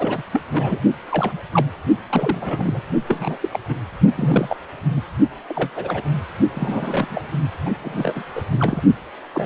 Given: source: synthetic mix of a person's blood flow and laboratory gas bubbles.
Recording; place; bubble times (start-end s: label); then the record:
Doppler ultrasound of blood flow; precordium
0.00-0.22 s: bubbles
0.33-0.42 s: bubbles
0.52-0.79 s: bubbles
1.11-1.38 s: bubbles
1.53-1.65 s: bubbles
2.09-2.83 s: bubbles
3.08-3.38 s: bubbles
3.40-3.48 s: bubbles
3.52-3.59 s: bubbles
3.69-3.76 s: bubbles
4.17-4.57 s: bubbles
4.96-5.01 s: bubbles
5.48-5.70 s: bubbles
5.76-6.02 s: bubbles
6.52-7.28 s: bubbles
7.65-7.70 s: bubbles
7.82-8.23 s: bubbles
8.34-8.45 s: bubbles
8.51-8.82 s: bubbles
9.34-9.45 s: bubbles
From the record:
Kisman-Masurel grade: 242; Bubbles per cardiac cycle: several, 3 to 8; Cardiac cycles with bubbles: 100%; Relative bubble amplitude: moderate (0.250 to 0.450); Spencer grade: 3 (all of the cardiac periods contain showers or single bubble signals, but not dominating or overriding the cardiac motion signals); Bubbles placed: only in the low amplitude regions of the cardiac cycle